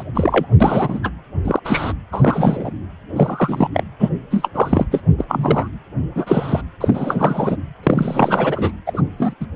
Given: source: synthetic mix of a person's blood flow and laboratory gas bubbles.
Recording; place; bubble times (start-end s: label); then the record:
Doppler ultrasound of blood flow; precordium
0.00-0.03 s: bubbles
0.15-0.46 s: bubbles
0.60-1.00 s: bubbles
1.03-1.10 s: bubbles
1.45-1.59 s: bubbles
1.65-1.93 s: bubbles
2.12-2.71 s: bubbles
3.16-3.68 s: bubbles
3.73-3.84 s: bubbles
4.00-4.09 s: bubbles
4.30-4.50 s: bubbles
4.54-4.85 s: bubbles
4.91-5.01 s: bubbles
5.17-5.25 s: bubbles
5.27-5.68 s: bubbles
6.15-6.62 s: bubbles
6.80-7.56 s: bubbles
7.83-8.71 s: bubbles
8.86-9.02 s: bubbles
9.17-9.34 s: bubbles
9.40-9.46 s: bubbles
From the record:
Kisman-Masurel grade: 243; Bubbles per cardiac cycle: several, 3 to 8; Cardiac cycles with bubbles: 100%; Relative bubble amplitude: loud (0.450 to 0.775); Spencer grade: 3 (all of the cardiac periods contain showers or single bubble signals, but not dominating or overriding the cardiac motion signals); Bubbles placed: anywhere in the cardiac cycle